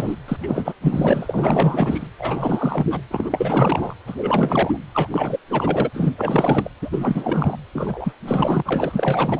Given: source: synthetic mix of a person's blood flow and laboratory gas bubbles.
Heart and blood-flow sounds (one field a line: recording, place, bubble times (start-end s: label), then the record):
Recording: Doppler ultrasound of blood flow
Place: precordium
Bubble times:
0.00-0.16 s: bubbles
0.28-0.36 s: bubbles
0.41-0.74 s: bubbles
0.81-2.07 s: bubbles
2.18-3.02 s: bubbles
3.10-3.94 s: bubbles
4.06-4.77 s: bubbles
4.93-5.07 s: bubbles
5.10-5.38 s: bubbles
5.50-5.90 s: bubbles
5.93-6.13 s: bubbles
6.17-6.69 s: bubbles
6.81-7.57 s: bubbles
7.73-8.13 s: bubbles
8.26-8.62 s: bubbles
8.65-9.40 s: bubbles
From the record:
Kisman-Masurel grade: 444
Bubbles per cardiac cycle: continuous sound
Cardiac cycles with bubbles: 100%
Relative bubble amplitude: maximal (0.775 to 0.999)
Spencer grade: 4 (maximum detectable bubble signal sounding continuously throughout systole and diastole of every cardiac period, and overriding the amplitude of the normal cardiac signals)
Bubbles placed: anywhere in the cardiac cycle